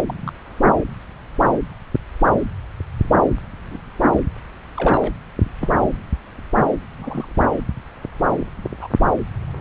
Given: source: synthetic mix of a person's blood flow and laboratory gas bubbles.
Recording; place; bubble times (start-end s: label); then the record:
Doppler ultrasound of blood flow; subclavian vein
0.05-0.33 s: bubbles
3.71-3.78 s: bubbles
4.76-5.12 s: bubbles
5.60-5.72 s: bubbles
6.97-7.32 s: bubbles
8.81-8.88 s: bubbles
From the record:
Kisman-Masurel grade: 121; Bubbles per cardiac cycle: 1 to 2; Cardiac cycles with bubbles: 10 to 50%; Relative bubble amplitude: barely perceptible (0.100 to 0.250); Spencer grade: 2 (many but less than half of the cardiac periods contain bubble signals, singularly or in groups); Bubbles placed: anywhere in the cardiac cycle